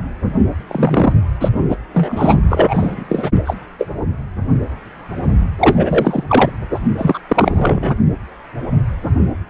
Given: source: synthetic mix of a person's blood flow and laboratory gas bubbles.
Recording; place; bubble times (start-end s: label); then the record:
Doppler ultrasound of blood flow; precordium
0.67-1.13 s: bubbles
1.40-1.48 s: bubbles
1.69-1.76 s: bubbles
1.92-2.41 s: bubbles
2.48-3.31 s: bubbles
3.45-3.54 s: bubbles
3.79-3.88 s: bubbles
5.59-6.24 s: bubbles
6.27-6.50 s: bubbles
6.74-6.79 s: bubbles
6.97-7.19 s: bubbles
7.29-7.97 s: bubbles
From the record:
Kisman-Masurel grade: 333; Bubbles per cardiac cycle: rolling drumbeat, 9 or more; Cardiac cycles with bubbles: 50 to 99%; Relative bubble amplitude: loud (0.450 to 0.775); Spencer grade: 3 (all of the cardiac periods contain showers or single bubble signals, but not dominating or overriding the cardiac motion signals); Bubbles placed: only in the low amplitude regions of the cardiac cycle